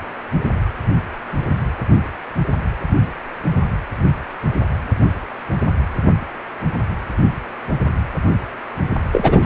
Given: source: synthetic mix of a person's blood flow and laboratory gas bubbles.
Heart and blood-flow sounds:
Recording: Doppler ultrasound of blood flow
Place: precordium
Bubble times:
9.12-9.46 s: bubbles
From the record:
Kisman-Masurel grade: 223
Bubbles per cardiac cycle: several, 3 to 8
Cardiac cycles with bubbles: 10 to 50%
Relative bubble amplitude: loud (0.450 to 0.775)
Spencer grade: 2 (many but less than half of the cardiac periods contain bubble signals, singularly or in groups)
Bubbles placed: anywhere in the cardiac cycle

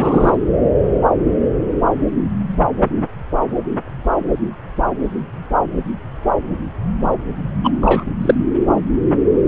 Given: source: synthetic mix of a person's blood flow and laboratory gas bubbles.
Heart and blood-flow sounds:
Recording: Doppler ultrasound of blood flow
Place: subclavian vein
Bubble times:
0.00-0.37 s: bubbles
7.63-7.71 s: bubbles
7.81-8.04 s: bubbles
8.21-8.35 s: bubbles
From the record:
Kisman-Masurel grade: 223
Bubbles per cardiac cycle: several, 3 to 8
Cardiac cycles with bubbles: 10 to 50%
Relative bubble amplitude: loud (0.450 to 0.775)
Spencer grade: 2 (many but less than half of the cardiac periods contain bubble signals, singularly or in groups)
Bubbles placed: anywhere in the cardiac cycle

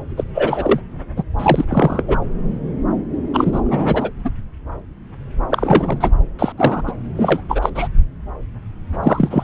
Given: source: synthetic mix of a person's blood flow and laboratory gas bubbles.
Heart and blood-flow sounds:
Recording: Doppler ultrasound of blood flow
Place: subclavian vein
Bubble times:
0.17-0.24 s: bubbles
0.34-0.80 s: bubbles
1.16-1.23 s: bubbles
1.38-1.65 s: bubbles
1.69-2.03 s: bubbles
2.08-2.17 s: bubbles
3.33-3.60 s: bubbles
3.65-4.10 s: bubbles
4.25-4.29 s: bubbles
5.50-6.10 s: bubbles
6.38-6.53 s: bubbles
6.58-6.83 s: bubbles
6.87-6.92 s: bubbles
7.17-7.41 s: bubbles
7.49-7.69 s: bubbles
7.75-7.88 s: bubbles
9.02-9.43 s: bubbles
From the record:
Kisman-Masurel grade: 233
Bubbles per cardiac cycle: several, 3 to 8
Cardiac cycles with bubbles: 50 to 99%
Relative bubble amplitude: loud (0.450 to 0.775)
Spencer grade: 3 (all of the cardiac periods contain showers or single bubble signals, but not dominating or overriding the cardiac motion signals)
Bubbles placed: anywhere in the cardiac cycle

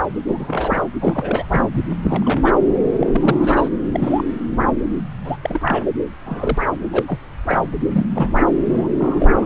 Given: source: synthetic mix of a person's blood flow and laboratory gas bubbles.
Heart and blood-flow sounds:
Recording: Doppler ultrasound of blood flow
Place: subclavian vein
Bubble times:
0.28-0.82 s: bubbles
0.99-1.46 s: bubbles
1.48-1.65 s: bubbles
1.71-1.87 s: bubbles
2.02-2.42 s: bubbles
2.44-2.54 s: bubbles
2.85-3.69 s: bubbles
3.92-4.24 s: bubbles
5.25-5.37 s: bubbles
5.42-5.82 s: bubbles
6.26-6.66 s: bubbles
6.92-7.04 s: bubbles
7.08-7.18 s: bubbles
7.47-7.62 s: bubbles
7.93-8.07 s: bubbles
8.15-8.29 s: bubbles
8.36-8.46 s: bubbles
8.71-8.88 s: bubbles
8.99-9.46 s: bubbles
From the record:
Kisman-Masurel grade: 232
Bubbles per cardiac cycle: several, 3 to 8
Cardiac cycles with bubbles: 50 to 99%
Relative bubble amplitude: moderate (0.250 to 0.450)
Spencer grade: 3 (all of the cardiac periods contain showers or single bubble signals, but not dominating or overriding the cardiac motion signals)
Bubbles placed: anywhere in the cardiac cycle

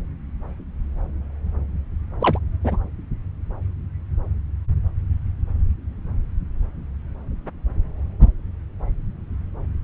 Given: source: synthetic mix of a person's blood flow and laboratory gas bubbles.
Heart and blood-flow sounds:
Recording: Doppler ultrasound of blood flow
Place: subclavian vein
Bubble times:
2.21-2.38 s: bubbles
2.64-2.78 s: bubbles
From the record:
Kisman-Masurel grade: 112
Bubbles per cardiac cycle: 1 to 2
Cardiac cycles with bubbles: 1 to 10%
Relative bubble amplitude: moderate (0.250 to 0.450)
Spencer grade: 1 (occasional bubble signal discernible with the cardiac motion signal, with majority of cardiac periods free of bubbles)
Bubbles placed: anywhere in the cardiac cycle

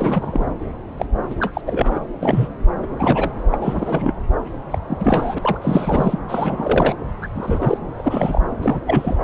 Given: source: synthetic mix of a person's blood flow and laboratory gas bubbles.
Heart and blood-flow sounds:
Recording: Doppler ultrasound of blood flow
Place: subclavian vein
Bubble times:
0.00-0.46 s: bubbles
0.97-1.06 s: bubbles
1.29-1.35 s: bubbles
1.40-1.61 s: bubbles
1.66-2.00 s: bubbles
2.23-2.48 s: bubbles
2.82-2.86 s: bubbles
2.98-3.32 s: bubbles
3.51-4.13 s: bubbles
4.71-4.79 s: bubbles
4.87-5.38 s: bubbles
5.42-5.58 s: bubbles
5.62-6.19 s: bubbles
6.29-6.95 s: bubbles
7.21-7.27 s: bubbles
7.34-7.77 s: bubbles
7.95-8.42 s: bubbles
8.62-8.81 s: bubbles
8.86-9.16 s: bubbles
9.22-9.24 s: bubbles
From the record:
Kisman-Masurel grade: 342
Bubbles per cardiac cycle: rolling drumbeat, 9 or more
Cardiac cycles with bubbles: 100%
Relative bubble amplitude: moderate (0.250 to 0.450)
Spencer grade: 3 (all of the cardiac periods contain showers or single bubble signals, but not dominating or overriding the cardiac motion signals)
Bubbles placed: anywhere in the cardiac cycle

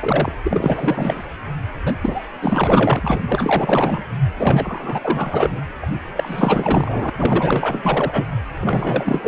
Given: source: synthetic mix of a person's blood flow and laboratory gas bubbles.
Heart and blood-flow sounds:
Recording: Doppler ultrasound of blood flow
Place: precordium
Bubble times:
0.00-0.33 s: bubbles
0.44-1.26 s: bubbles
1.85-1.94 s: bubbles
2.01-2.28 s: bubbles
2.42-3.19 s: bubbles
3.28-4.04 s: bubbles
4.36-5.62 s: bubbles
5.82-5.87 s: bubbles
6.15-7.10 s: bubbles
7.18-8.24 s: bubbles
8.59-9.28 s: bubbles
From the record:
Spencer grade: 4 (maximum detectable bubble signal sounding continuously throughout systole and diastole of every cardiac period, and overriding the amplitude of the normal cardiac signals)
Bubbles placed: anywhere in the cardiac cycle

